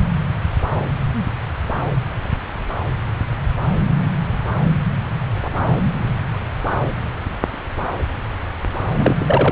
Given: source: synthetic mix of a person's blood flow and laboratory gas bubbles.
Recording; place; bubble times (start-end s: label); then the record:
Doppler ultrasound of blood flow; subclavian vein
8.96-9.52 s: bubbles
From the record:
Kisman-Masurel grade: 213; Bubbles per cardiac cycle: several, 3 to 8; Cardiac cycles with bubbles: 1 to 10%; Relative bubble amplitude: loud (0.450 to 0.775); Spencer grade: 1 (occasional bubble signal discernible with the cardiac motion signal, with majority of cardiac periods free of bubbles); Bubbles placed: anywhere in the cardiac cycle